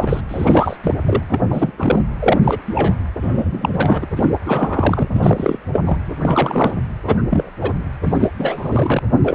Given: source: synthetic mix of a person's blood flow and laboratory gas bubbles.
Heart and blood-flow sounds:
Doppler ultrasound of blood flow; precordium
0.00-0.20 s: bubbles
0.29-0.77 s: bubbles
0.83-0.95 s: bubbles
1.05-1.24 s: bubbles
1.29-1.40 s: bubbles
1.51-1.74 s: bubbles
1.77-2.04 s: bubbles
2.19-2.40 s: bubbles
2.44-2.58 s: bubbles
2.67-2.95 s: bubbles
3.21-4.06 s: bubbles
4.16-4.28 s: bubbles
4.45-5.08 s: bubbles
5.13-5.57 s: bubbles
5.72-5.80 s: bubbles
5.86-5.97 s: bubbles
6.21-6.74 s: bubbles
7.06-7.16 s: bubbles
7.30-7.49 s: bubbles
7.61-7.73 s: bubbles
8.03-8.16 s: bubbles
8.20-8.28 s: bubbles
8.39-8.99 s: bubbles
9.23-9.35 s: bubbles
From the record:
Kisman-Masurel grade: 343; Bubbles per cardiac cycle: rolling drumbeat, 9 or more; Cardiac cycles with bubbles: 100%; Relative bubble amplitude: loud (0.450 to 0.775); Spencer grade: 3 (all of the cardiac periods contain showers or single bubble signals, but not dominating or overriding the cardiac motion signals); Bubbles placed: anywhere in the cardiac cycle

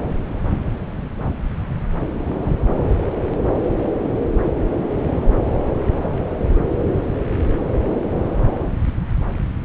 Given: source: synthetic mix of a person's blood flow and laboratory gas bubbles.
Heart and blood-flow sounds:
Doppler ultrasound of blood flow; subclavian vein
2.42-2.51 s: bubbles
From the record:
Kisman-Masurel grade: 111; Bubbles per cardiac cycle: 1 to 2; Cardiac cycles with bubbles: 1 to 10%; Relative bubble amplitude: barely perceptible (0.100 to 0.250); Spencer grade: 1 (occasional bubble signal discernible with the cardiac motion signal, with majority of cardiac periods free of bubbles); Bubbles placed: anywhere in the cardiac cycle

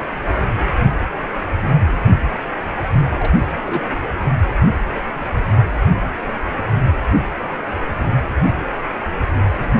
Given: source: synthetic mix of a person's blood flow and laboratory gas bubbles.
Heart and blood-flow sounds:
Doppler ultrasound of blood flow; precordium
3.19-3.35 s: bubbles
3.65-3.85 s: bubbles
From the record:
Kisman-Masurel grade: 122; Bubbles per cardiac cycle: 1 to 2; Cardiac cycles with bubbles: 10 to 50%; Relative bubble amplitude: moderate (0.250 to 0.450); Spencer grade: 2 (many but less than half of the cardiac periods contain bubble signals, singularly or in groups); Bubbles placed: anywhere in the cardiac cycle

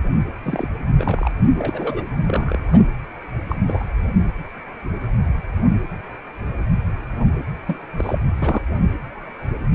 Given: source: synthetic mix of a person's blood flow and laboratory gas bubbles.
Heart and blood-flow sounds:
Doppler ultrasound of blood flow; precordium
0.42-0.68 s: bubbles
0.98-1.31 s: bubbles
1.55-2.04 s: bubbles
2.26-2.58 s: bubbles
2.67-2.85 s: bubbles
3.49-3.56 s: bubbles
3.67-3.85 s: bubbles
7.67-7.76 s: bubbles
7.97-8.18 s: bubbles
8.39-8.62 s: bubbles
From the record:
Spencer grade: 2 (many but less than half of the cardiac periods contain bubble signals, singularly or in groups); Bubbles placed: anywhere in the cardiac cycle

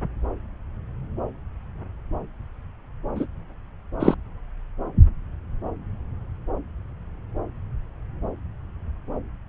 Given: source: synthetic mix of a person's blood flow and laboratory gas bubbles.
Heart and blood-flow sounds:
Doppler ultrasound of blood flow; subclavian vein
3.15-3.27 s: bubbles
4.00-4.14 s: bubbles
From the record:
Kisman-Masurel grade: 113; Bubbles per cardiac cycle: 1 to 2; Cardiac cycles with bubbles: 1 to 10%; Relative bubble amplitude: loud (0.450 to 0.775); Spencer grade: 1 (occasional bubble signal discernible with the cardiac motion signal, with majority of cardiac periods free of bubbles); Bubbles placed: anywhere in the cardiac cycle

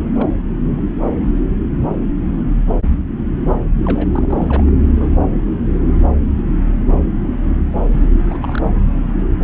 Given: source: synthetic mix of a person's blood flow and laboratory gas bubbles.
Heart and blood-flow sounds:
Doppler ultrasound of blood flow; subclavian vein
0.14-0.28 s: bubbles
0.77-0.81 s: bubbles
0.98-1.11 s: bubbles
3.85-4.07 s: bubbles
4.12-4.71 s: bubbles
5.00-5.10 s: bubbles
7.91-8.04 s: bubbles
8.24-8.62 s: bubbles
8.74-8.84 s: bubbles
From the record:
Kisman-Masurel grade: 221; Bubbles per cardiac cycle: several, 3 to 8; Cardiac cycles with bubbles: 10 to 50%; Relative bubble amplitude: barely perceptible (0.100 to 0.250); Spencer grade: 2 (many but less than half of the cardiac periods contain bubble signals, singularly or in groups); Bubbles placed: anywhere in the cardiac cycle

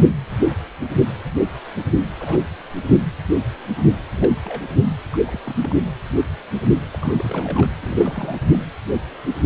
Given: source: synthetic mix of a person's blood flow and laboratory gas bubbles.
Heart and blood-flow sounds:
Doppler ultrasound of blood flow; precordium
2.20-2.48 s: bubbles
2.77-2.84 s: bubbles
4.14-4.60 s: bubbles
5.12-5.18 s: bubbles
5.23-5.39 s: bubbles
5.45-5.74 s: bubbles
6.92-6.98 s: bubbles
7.00-7.69 s: bubbles
7.82-8.36 s: bubbles
8.52-8.57 s: bubbles
From the record:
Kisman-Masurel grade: 221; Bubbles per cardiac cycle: several, 3 to 8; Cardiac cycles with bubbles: 10 to 50%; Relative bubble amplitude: barely perceptible (0.100 to 0.250); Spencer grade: 2 (many but less than half of the cardiac periods contain bubble signals, singularly or in groups); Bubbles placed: anywhere in the cardiac cycle

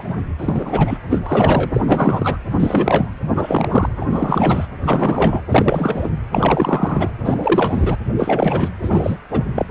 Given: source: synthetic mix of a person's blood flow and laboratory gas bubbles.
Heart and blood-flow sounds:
Doppler ultrasound of blood flow; precordium
0.09-0.16 s: bubbles
0.38-0.98 s: bubbles
1.09-1.20 s: bubbles
1.26-1.70 s: bubbles
1.73-1.81 s: bubbles
1.86-2.38 s: bubbles
2.49-3.11 s: bubbles
3.36-3.89 s: bubbles
4.00-4.06 s: bubbles
4.08-4.67 s: bubbles
4.83-5.42 s: bubbles
5.48-6.08 s: bubbles
6.32-7.11 s: bubbles
7.25-7.96 s: bubbles
8.16-8.70 s: bubbles
8.83-9.17 s: bubbles
9.31-9.66 s: bubbles
From the record:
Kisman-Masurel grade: 343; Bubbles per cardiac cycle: rolling drumbeat, 9 or more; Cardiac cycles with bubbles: 100%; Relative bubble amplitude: loud (0.450 to 0.775); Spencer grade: 3 (all of the cardiac periods contain showers or single bubble signals, but not dominating or overriding the cardiac motion signals); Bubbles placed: anywhere in the cardiac cycle

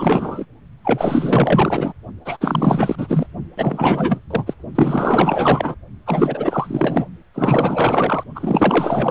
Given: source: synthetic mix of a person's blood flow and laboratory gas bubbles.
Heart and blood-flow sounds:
Doppler ultrasound of blood flow; precordium
0.00-0.45 s: bubbles
0.84-1.93 s: bubbles
2.25-2.37 s: bubbles
2.41-3.26 s: bubbles
3.58-4.19 s: bubbles
4.30-4.54 s: bubbles
4.75-5.75 s: bubbles
6.06-7.06 s: bubbles
7.34-8.23 s: bubbles
8.35-9.11 s: bubbles
From the record:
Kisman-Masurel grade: 444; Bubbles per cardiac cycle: continuous sound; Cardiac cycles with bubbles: 100%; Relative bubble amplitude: maximal (0.775 to 0.999); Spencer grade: 4 (maximum detectable bubble signal sounding continuously throughout systole and diastole of every cardiac period, and overriding the amplitude of the normal cardiac signals); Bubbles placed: only in the low amplitude regions of the cardiac cycle

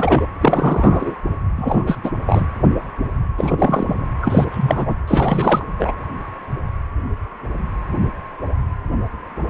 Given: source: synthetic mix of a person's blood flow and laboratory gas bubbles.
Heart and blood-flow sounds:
Doppler ultrasound of blood flow; precordium
0.00-0.27 s: bubbles
0.41-1.17 s: bubbles
1.55-1.98 s: bubbles
2.03-2.10 s: bubbles
2.26-2.47 s: bubbles
3.37-4.07 s: bubbles
4.22-4.45 s: bubbles
4.51-4.96 s: bubbles
5.08-5.64 s: bubbles
5.79-5.92 s: bubbles
From the record:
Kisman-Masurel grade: 223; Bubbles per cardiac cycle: several, 3 to 8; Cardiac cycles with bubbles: 10 to 50%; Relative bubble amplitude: loud (0.450 to 0.775); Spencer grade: 2 (many but less than half of the cardiac periods contain bubble signals, singularly or in groups); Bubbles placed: anywhere in the cardiac cycle

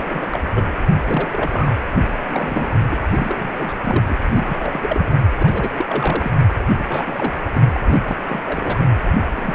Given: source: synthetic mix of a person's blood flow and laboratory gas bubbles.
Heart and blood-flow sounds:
Doppler ultrasound of blood flow; precordium
0.00-0.40 s: bubbles
0.53-0.65 s: bubbles
0.92-1.72 s: bubbles
2.25-2.71 s: bubbles
2.90-2.98 s: bubbles
3.15-3.73 s: bubbles
3.85-4.05 s: bubbles
4.09-4.15 s: bubbles
4.33-5.24 s: bubbles
5.38-5.71 s: bubbles
5.79-6.32 s: bubbles
6.76-7.33 s: bubbles
7.53-7.62 s: bubbles
7.75-7.80 s: bubbles
7.87-8.00 s: bubbles
8.08-8.16 s: bubbles
8.27-8.42 s: bubbles
8.46-8.87 s: bubbles
9.34-9.55 s: bubbles
From the record:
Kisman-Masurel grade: 342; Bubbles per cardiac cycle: rolling drumbeat, 9 or more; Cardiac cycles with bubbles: 100%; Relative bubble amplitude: moderate (0.250 to 0.450); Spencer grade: 3 (all of the cardiac periods contain showers or single bubble signals, but not dominating or overriding the cardiac motion signals); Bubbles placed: anywhere in the cardiac cycle

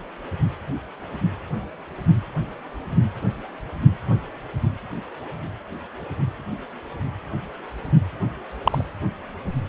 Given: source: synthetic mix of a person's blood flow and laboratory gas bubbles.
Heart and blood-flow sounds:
Doppler ultrasound of blood flow; precordium
8.62-8.85 s: bubbles
From the record:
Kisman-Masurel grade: 123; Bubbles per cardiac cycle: 1 to 2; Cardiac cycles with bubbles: 10 to 50%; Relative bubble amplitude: loud (0.450 to 0.775); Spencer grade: 2 (many but less than half of the cardiac periods contain bubble signals, singularly or in groups); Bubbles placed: anywhere in the cardiac cycle

